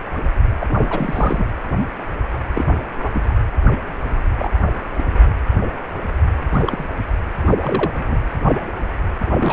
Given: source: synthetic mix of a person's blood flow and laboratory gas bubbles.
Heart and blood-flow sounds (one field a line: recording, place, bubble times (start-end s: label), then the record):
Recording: Doppler ultrasound of blood flow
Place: precordium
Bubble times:
0.60-0.66 s: bubbles
0.69-1.46 s: bubbles
2.54-2.85 s: bubbles
3.02-3.34 s: bubbles
4.38-4.50 s: bubbles
4.97-5.02 s: bubbles
6.52-6.84 s: bubbles
7.45-7.52 s: bubbles
7.62-7.91 s: bubbles
7.97-8.18 s: bubbles
9.32-9.53 s: bubbles
From the record:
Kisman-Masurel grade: 232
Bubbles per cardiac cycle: several, 3 to 8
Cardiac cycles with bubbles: 50 to 99%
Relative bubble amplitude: moderate (0.250 to 0.450)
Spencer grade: 3 (all of the cardiac periods contain showers or single bubble signals, but not dominating or overriding the cardiac motion signals)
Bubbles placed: anywhere in the cardiac cycle